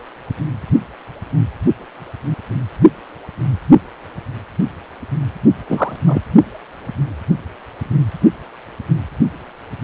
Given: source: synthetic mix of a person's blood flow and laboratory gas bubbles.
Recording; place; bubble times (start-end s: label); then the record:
Doppler ultrasound of blood flow; precordium
5.67-5.96 s: bubbles
6.06-6.21 s: bubbles
From the record:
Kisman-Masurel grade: 213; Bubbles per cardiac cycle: several, 3 to 8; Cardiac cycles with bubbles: 1 to 10%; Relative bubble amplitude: loud (0.450 to 0.775); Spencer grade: 1 (occasional bubble signal discernible with the cardiac motion signal, with majority of cardiac periods free of bubbles); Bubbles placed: only in the low amplitude regions of the cardiac cycle